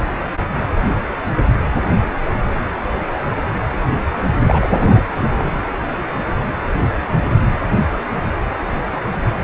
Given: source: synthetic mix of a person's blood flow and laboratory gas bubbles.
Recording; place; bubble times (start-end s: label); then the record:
Doppler ultrasound of blood flow; precordium
4.47-5.05 s: bubbles
5.23-5.51 s: bubbles
From the record:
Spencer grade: 2 (many but less than half of the cardiac periods contain bubble signals, singularly or in groups); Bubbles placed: anywhere in the cardiac cycle